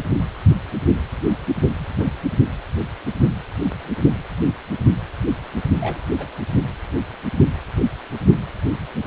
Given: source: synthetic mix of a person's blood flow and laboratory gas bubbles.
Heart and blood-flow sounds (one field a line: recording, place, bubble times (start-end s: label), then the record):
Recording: Doppler ultrasound of blood flow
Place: precordium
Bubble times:
1.79-1.86 s: bubbles
1.97-2.08 s: bubbles
5.80-6.03 s: bubbles
6.14-6.27 s: bubbles
From the record:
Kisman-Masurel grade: 121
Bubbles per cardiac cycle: 1 to 2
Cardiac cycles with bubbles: 10 to 50%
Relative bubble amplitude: barely perceptible (0.100 to 0.250)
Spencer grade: 2 (many but less than half of the cardiac periods contain bubble signals, singularly or in groups)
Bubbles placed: only in the low amplitude regions of the cardiac cycle